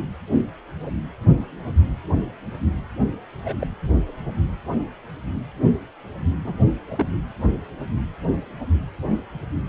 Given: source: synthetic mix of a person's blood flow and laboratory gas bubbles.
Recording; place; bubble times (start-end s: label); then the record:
Doppler ultrasound of blood flow; precordium
0.31-0.45 s: bubbles
0.83-0.91 s: bubbles
3.44-3.67 s: bubbles
6.44-6.58 s: bubbles
6.89-7.04 s: bubbles
From the record:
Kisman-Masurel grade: 121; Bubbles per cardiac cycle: 1 to 2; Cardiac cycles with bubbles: 10 to 50%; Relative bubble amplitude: barely perceptible (0.100 to 0.250); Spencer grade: 2 (many but less than half of the cardiac periods contain bubble signals, singularly or in groups); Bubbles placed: anywhere in the cardiac cycle